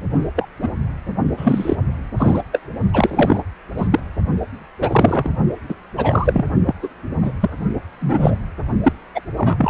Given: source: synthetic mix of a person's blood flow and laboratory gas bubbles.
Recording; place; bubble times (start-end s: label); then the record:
Doppler ultrasound of blood flow; precordium
0.35-0.48 s: bubbles
0.62-0.68 s: bubbles
1.36-1.76 s: bubbles
2.17-2.42 s: bubbles
2.52-2.60 s: bubbles
2.93-3.42 s: bubbles
3.77-4.00 s: bubbles
4.80-5.29 s: bubbles
5.69-5.75 s: bubbles
5.97-6.46 s: bubbles
6.66-6.75 s: bubbles
6.82-6.89 s: bubbles
7.22-7.32 s: bubbles
7.41-7.51 s: bubbles
8.00-8.35 s: bubbles
8.84-8.93 s: bubbles
9.14-9.21 s: bubbles
9.38-9.70 s: bubbles
From the record:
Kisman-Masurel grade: 243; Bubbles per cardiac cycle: several, 3 to 8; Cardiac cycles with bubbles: 100%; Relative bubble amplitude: loud (0.450 to 0.775); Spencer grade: 3 (all of the cardiac periods contain showers or single bubble signals, but not dominating or overriding the cardiac motion signals); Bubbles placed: only in the low amplitude regions of the cardiac cycle